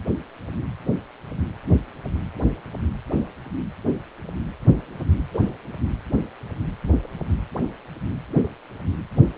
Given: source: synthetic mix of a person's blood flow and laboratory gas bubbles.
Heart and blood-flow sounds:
Doppler ultrasound of blood flow; precordium
5.33-5.48 s: bubbles
From the record:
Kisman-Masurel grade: 112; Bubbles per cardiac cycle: 1 to 2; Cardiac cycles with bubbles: 1 to 10%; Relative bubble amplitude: moderate (0.250 to 0.450); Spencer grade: 1 (occasional bubble signal discernible with the cardiac motion signal, with majority of cardiac periods free of bubbles); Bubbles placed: anywhere in the cardiac cycle

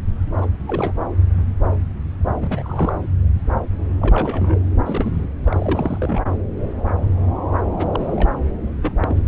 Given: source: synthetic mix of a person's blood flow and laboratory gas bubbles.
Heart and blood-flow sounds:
Doppler ultrasound of blood flow; subclavian vein
0.36-0.46 s: bubbles
0.67-0.93 s: bubbles
2.40-2.93 s: bubbles
4.00-4.56 s: bubbles
4.85-5.24 s: bubbles
5.44-6.21 s: bubbles
7.76-7.87 s: bubbles
7.91-8.33 s: bubbles
8.82-8.92 s: bubbles
9.00-9.21 s: bubbles
From the record:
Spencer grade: 3 (all of the cardiac periods contain showers or single bubble signals, but not dominating or overriding the cardiac motion signals); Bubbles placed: anywhere in the cardiac cycle

